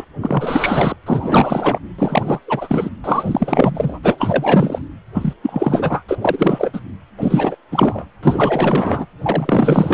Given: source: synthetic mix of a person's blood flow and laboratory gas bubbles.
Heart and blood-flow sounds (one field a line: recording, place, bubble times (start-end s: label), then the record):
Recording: Doppler ultrasound of blood flow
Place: precordium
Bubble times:
0.00-0.04 s: bubbles
0.21-0.96 s: bubbles
1.06-1.78 s: bubbles
1.98-2.39 s: bubbles
2.47-2.90 s: bubbles
3.04-3.99 s: bubbles
4.03-4.81 s: bubbles
5.13-5.33 s: bubbles
5.42-6.03 s: bubbles
6.08-6.19 s: bubbles
6.21-6.80 s: bubbles
7.17-7.56 s: bubbles
7.71-8.05 s: bubbles
8.22-9.06 s: bubbles
9.22-9.94 s: bubbles
From the record:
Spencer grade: 4 (maximum detectable bubble signal sounding continuously throughout systole and diastole of every cardiac period, and overriding the amplitude of the normal cardiac signals)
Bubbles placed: anywhere in the cardiac cycle